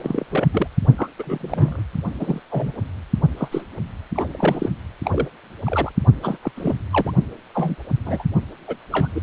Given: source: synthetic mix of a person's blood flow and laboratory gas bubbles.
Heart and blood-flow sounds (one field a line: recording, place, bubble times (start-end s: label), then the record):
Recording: Doppler ultrasound of blood flow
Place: precordium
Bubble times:
0.03-0.26 s: bubbles
0.30-0.46 s: bubbles
0.53-0.67 s: bubbles
0.98-1.09 s: bubbles
1.18-1.82 s: bubbles
2.20-2.40 s: bubbles
2.50-2.73 s: bubbles
3.37-3.48 s: bubbles
3.51-3.63 s: bubbles
4.14-4.70 s: bubbles
5.04-5.28 s: bubbles
5.65-5.92 s: bubbles
6.22-6.38 s: bubbles
6.43-6.52 s: bubbles
6.56-6.74 s: bubbles
6.90-7.13 s: bubbles
7.54-7.75 s: bubbles
8.03-8.23 s: bubbles
8.67-8.75 s: bubbles
8.91-9.08 s: bubbles
9.15-9.21 s: bubbles
From the record:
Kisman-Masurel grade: 242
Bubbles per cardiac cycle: several, 3 to 8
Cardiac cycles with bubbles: 100%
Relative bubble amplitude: moderate (0.250 to 0.450)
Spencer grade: 3 (all of the cardiac periods contain showers or single bubble signals, but not dominating or overriding the cardiac motion signals)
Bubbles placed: only in the low amplitude regions of the cardiac cycle